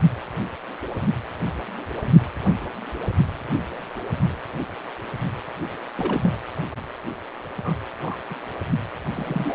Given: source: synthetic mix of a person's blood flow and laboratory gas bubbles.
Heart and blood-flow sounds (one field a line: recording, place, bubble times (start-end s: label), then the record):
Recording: Doppler ultrasound of blood flow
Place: precordium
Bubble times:
5.97-6.33 s: bubbles
7.64-7.79 s: bubbles
8.00-8.17 s: bubbles
8.29-8.34 s: bubbles
9.13-9.55 s: bubbles
From the record:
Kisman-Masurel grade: 221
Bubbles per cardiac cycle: several, 3 to 8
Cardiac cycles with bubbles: 10 to 50%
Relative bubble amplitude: barely perceptible (0.100 to 0.250)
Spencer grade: 2 (many but less than half of the cardiac periods contain bubble signals, singularly or in groups)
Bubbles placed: anywhere in the cardiac cycle